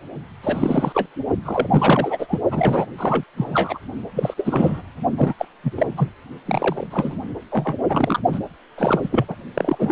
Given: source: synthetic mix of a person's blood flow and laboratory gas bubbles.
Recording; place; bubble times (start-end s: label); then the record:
Doppler ultrasound of blood flow; precordium
0.43-1.08 s: bubbles
1.44-2.39 s: bubbles
2.51-2.85 s: bubbles
2.98-3.23 s: bubbles
3.36-3.79 s: bubbles
4.15-4.34 s: bubbles
4.37-4.82 s: bubbles
5.17-5.34 s: bubbles
5.38-5.46 s: bubbles
5.64-5.73 s: bubbles
5.77-5.87 s: bubbles
5.97-6.08 s: bubbles
6.46-6.87 s: bubbles
6.91-7.19 s: bubbles
7.51-7.76 s: bubbles
7.89-8.20 s: bubbles
8.32-8.40 s: bubbles
8.78-9.25 s: bubbles
9.28-9.35 s: bubbles
9.54-9.92 s: bubbles
From the record:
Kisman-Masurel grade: 343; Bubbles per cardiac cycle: rolling drumbeat, 9 or more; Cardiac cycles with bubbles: 100%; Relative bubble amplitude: loud (0.450 to 0.775); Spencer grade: 3 (all of the cardiac periods contain showers or single bubble signals, but not dominating or overriding the cardiac motion signals); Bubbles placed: only in the low amplitude regions of the cardiac cycle